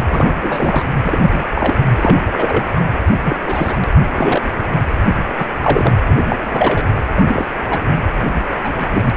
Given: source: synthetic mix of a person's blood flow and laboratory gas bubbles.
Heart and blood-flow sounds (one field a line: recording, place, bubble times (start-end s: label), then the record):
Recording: Doppler ultrasound of blood flow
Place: precordium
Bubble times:
0.09-0.28 s: bubbles
0.42-0.85 s: bubbles
1.04-1.43 s: bubbles
1.54-1.74 s: bubbles
1.96-2.18 s: bubbles
2.31-2.63 s: bubbles
2.75-2.80 s: bubbles
3.23-3.82 s: bubbles
4.16-4.65 s: bubbles
5.38-5.46 s: bubbles
5.61-5.92 s: bubbles
6.07-6.17 s: bubbles
6.29-6.36 s: bubbles
6.40-6.87 s: bubbles
7.16-7.45 s: bubbles
7.67-7.82 s: bubbles
8.64-8.87 s: bubbles
8.93-9.10 s: bubbles
From the record:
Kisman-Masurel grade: 243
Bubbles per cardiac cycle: several, 3 to 8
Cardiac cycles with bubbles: 100%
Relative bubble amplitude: loud (0.450 to 0.775)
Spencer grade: 3 (all of the cardiac periods contain showers or single bubble signals, but not dominating or overriding the cardiac motion signals)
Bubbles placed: anywhere in the cardiac cycle